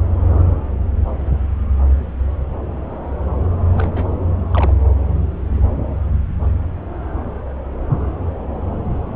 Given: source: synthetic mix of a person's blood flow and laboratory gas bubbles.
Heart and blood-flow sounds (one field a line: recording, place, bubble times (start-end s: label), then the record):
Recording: Doppler ultrasound of blood flow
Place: subclavian vein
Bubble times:
3.72-4.08 s: bubbles
4.51-4.74 s: bubbles
From the record:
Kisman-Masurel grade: 111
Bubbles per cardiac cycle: 1 to 2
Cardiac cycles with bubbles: 1 to 10%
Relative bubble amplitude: barely perceptible (0.100 to 0.250)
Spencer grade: 1 (occasional bubble signal discernible with the cardiac motion signal, with majority of cardiac periods free of bubbles)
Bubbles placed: anywhere in the cardiac cycle